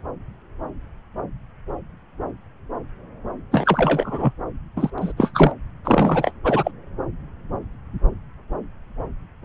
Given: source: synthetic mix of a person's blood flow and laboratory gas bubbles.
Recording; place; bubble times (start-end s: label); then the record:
Doppler ultrasound of blood flow; subclavian vein
3.51-4.33 s: bubbles
4.76-4.91 s: bubbles
4.98-5.12 s: bubbles
5.17-5.52 s: bubbles
5.84-6.33 s: bubbles
6.44-6.71 s: bubbles
From the record:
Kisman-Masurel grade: 223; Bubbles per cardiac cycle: several, 3 to 8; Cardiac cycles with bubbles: 10 to 50%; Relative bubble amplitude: loud (0.450 to 0.775); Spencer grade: 2 (many but less than half of the cardiac periods contain bubble signals, singularly or in groups); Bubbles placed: anywhere in the cardiac cycle